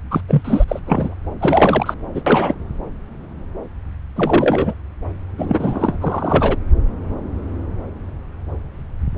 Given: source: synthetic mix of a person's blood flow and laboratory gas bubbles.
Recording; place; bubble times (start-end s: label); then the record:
Doppler ultrasound of blood flow; subclavian vein
0.10-0.21 s: bubbles
0.28-0.64 s: bubbles
0.68-0.79 s: bubbles
0.85-1.15 s: bubbles
1.40-1.94 s: bubbles
2.14-2.21 s: bubbles
2.26-2.54 s: bubbles
4.16-4.74 s: bubbles
5.37-6.57 s: bubbles
From the record:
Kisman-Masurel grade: 223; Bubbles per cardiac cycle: several, 3 to 8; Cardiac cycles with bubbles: 10 to 50%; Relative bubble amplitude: loud (0.450 to 0.775); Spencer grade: 2 (many but less than half of the cardiac periods contain bubble signals, singularly or in groups); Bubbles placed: anywhere in the cardiac cycle